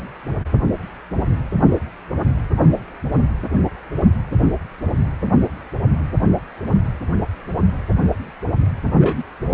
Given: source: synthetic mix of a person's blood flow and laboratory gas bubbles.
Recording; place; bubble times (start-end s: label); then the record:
Doppler ultrasound of blood flow; precordium
8.99-9.23 s: bubbles
From the record:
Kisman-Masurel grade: 113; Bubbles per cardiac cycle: 1 to 2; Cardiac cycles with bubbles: 1 to 10%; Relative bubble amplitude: loud (0.450 to 0.775); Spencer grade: 1 (occasional bubble signal discernible with the cardiac motion signal, with majority of cardiac periods free of bubbles); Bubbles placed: anywhere in the cardiac cycle